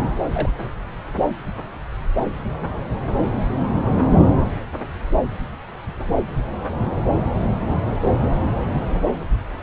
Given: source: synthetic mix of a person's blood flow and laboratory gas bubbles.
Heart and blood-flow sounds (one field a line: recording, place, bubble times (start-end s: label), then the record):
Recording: Doppler ultrasound of blood flow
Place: subclavian vein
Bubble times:
0.32-0.50 s: bubbles
From the record:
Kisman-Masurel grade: 112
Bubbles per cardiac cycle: 1 to 2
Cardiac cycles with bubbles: 1 to 10%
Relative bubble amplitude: moderate (0.250 to 0.450)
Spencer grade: 1 (occasional bubble signal discernible with the cardiac motion signal, with majority of cardiac periods free of bubbles)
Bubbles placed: anywhere in the cardiac cycle